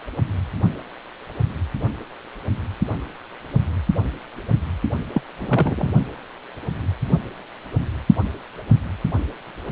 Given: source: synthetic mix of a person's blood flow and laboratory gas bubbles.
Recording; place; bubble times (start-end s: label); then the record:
Doppler ultrasound of blood flow; precordium
5.12-5.21 s: bubbles
5.38-5.89 s: bubbles
From the record:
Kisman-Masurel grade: 112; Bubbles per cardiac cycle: 1 to 2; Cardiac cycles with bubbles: 1 to 10%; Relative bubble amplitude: moderate (0.250 to 0.450); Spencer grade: 1 (occasional bubble signal discernible with the cardiac motion signal, with majority of cardiac periods free of bubbles); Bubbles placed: only in the low amplitude regions of the cardiac cycle